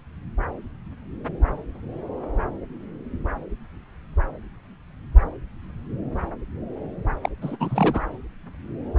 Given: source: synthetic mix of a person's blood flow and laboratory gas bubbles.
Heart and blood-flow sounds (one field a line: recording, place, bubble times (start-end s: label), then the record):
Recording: Doppler ultrasound of blood flow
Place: subclavian vein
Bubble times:
7.23-7.29 s: bubbles
7.42-7.57 s: bubbles
7.59-8.01 s: bubbles
From the record:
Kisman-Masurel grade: 212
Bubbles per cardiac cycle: several, 3 to 8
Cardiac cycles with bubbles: 1 to 10%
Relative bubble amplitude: moderate (0.250 to 0.450)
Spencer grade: 1 (occasional bubble signal discernible with the cardiac motion signal, with majority of cardiac periods free of bubbles)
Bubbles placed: anywhere in the cardiac cycle